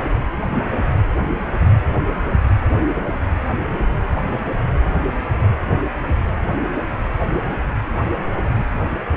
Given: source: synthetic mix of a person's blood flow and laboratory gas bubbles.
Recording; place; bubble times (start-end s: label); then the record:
Doppler ultrasound of blood flow; precordium
0.03-0.46 s: bubbles
From the record:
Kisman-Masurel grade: 111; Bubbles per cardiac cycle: 1 to 2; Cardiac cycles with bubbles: 1 to 10%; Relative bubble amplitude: barely perceptible (0.100 to 0.250); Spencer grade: 1 (occasional bubble signal discernible with the cardiac motion signal, with majority of cardiac periods free of bubbles); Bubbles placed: anywhere in the cardiac cycle